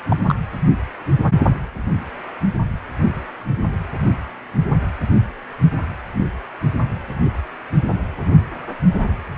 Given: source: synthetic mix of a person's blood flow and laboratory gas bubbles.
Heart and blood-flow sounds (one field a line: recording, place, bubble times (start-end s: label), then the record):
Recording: Doppler ultrasound of blood flow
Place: precordium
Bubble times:
0.08-0.34 s: bubbles
From the record:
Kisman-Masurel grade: 212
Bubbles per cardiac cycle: several, 3 to 8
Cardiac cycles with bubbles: 1 to 10%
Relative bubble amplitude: moderate (0.250 to 0.450)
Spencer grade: 1 (occasional bubble signal discernible with the cardiac motion signal, with majority of cardiac periods free of bubbles)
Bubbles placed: anywhere in the cardiac cycle